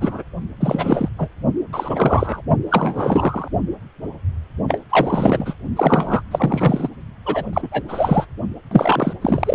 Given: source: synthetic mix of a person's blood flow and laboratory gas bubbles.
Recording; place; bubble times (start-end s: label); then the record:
Doppler ultrasound of blood flow; precordium
0.00-0.23 s: bubbles
0.60-1.09 s: bubbles
1.18-1.29 s: bubbles
1.73-2.42 s: bubbles
2.70-3.48 s: bubbles
4.67-4.78 s: bubbles
4.89-5.54 s: bubbles
5.75-6.22 s: bubbles
6.31-6.89 s: bubbles
7.25-7.84 s: bubbles
7.88-8.26 s: bubbles
8.71-9.14 s: bubbles
9.21-9.54 s: bubbles
From the record:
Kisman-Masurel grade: 333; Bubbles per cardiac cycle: rolling drumbeat, 9 or more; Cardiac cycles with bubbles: 50 to 99%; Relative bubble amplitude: loud (0.450 to 0.775); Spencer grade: 3 (all of the cardiac periods contain showers or single bubble signals, but not dominating or overriding the cardiac motion signals); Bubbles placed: only in the low amplitude regions of the cardiac cycle